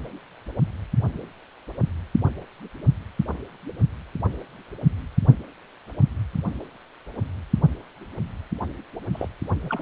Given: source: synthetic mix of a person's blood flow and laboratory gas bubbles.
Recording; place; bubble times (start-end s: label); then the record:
Doppler ultrasound of blood flow; precordium
9.12-9.28 s: bubbles
9.63-9.82 s: bubbles
From the record:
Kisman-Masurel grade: 211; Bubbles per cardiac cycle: several, 3 to 8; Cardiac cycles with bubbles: 1 to 10%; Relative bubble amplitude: barely perceptible (0.100 to 0.250); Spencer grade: 1 (occasional bubble signal discernible with the cardiac motion signal, with majority of cardiac periods free of bubbles); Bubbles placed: only in the low amplitude regions of the cardiac cycle